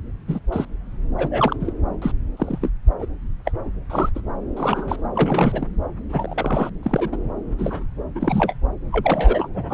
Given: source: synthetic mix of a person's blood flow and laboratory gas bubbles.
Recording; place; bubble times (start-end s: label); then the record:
Doppler ultrasound of blood flow; subclavian vein
0.27-0.40 s: bubbles
0.52-0.65 s: bubbles
1.18-1.56 s: bubbles
1.60-1.73 s: bubbles
2.01-2.12 s: bubbles
2.37-2.58 s: bubbles
2.61-2.70 s: bubbles
2.99-3.07 s: bubbles
3.45-3.51 s: bubbles
3.89-4.09 s: bubbles
4.15-4.21 s: bubbles
4.56-4.96 s: bubbles
5.15-5.67 s: bubbles
6.09-6.69 s: bubbles
6.83-7.17 s: bubbles
7.58-7.83 s: bubbles
8.15-8.54 s: bubbles
8.91-9.47 s: bubbles
9.54-9.74 s: bubbles
From the record:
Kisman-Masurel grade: 242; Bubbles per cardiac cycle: several, 3 to 8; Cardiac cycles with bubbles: 100%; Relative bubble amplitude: moderate (0.250 to 0.450); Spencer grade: 3 (all of the cardiac periods contain showers or single bubble signals, but not dominating or overriding the cardiac motion signals); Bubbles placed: anywhere in the cardiac cycle